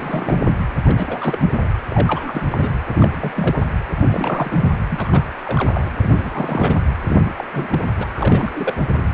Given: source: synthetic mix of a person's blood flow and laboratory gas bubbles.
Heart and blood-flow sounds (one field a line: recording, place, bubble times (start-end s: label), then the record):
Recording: Doppler ultrasound of blood flow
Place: precordium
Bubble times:
0.00-0.43 s: bubbles
0.46-0.54 s: bubbles
0.85-1.67 s: bubbles
1.90-2.43 s: bubbles
2.50-2.71 s: bubbles
2.88-3.62 s: bubbles
3.90-4.70 s: bubbles
4.90-5.23 s: bubbles
5.45-5.88 s: bubbles
6.00-6.78 s: bubbles
7.07-7.33 s: bubbles
7.37-7.45 s: bubbles
7.53-7.85 s: bubbles
7.96-8.06 s: bubbles
8.14-8.77 s: bubbles
8.97-9.05 s: bubbles
From the record:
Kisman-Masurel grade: 342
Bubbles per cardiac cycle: rolling drumbeat, 9 or more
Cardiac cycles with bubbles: 100%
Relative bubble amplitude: moderate (0.250 to 0.450)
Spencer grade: 3 (all of the cardiac periods contain showers or single bubble signals, but not dominating or overriding the cardiac motion signals)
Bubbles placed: anywhere in the cardiac cycle